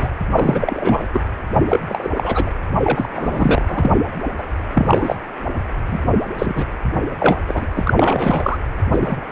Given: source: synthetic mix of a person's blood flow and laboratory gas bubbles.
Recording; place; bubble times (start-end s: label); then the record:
Doppler ultrasound of blood flow; precordium
0.00-0.08 s: bubbles
0.35-1.06 s: bubbles
1.13-1.21 s: bubbles
1.57-1.82 s: bubbles
1.88-2.09 s: bubbles
2.14-2.52 s: bubbles
2.83-3.65 s: bubbles
3.68-3.92 s: bubbles
4.38-4.43 s: bubbles
4.75-5.16 s: bubbles
5.89-6.00 s: bubbles
6.38-6.66 s: bubbles
7.20-7.38 s: bubbles
7.47-7.66 s: bubbles
7.76-7.94 s: bubbles
7.96-8.59 s: bubbles
8.91-9.16 s: bubbles
From the record:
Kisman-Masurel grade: 243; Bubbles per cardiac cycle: several, 3 to 8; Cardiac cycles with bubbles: 100%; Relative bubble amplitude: loud (0.450 to 0.775); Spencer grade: 3 (all of the cardiac periods contain showers or single bubble signals, but not dominating or overriding the cardiac motion signals); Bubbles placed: anywhere in the cardiac cycle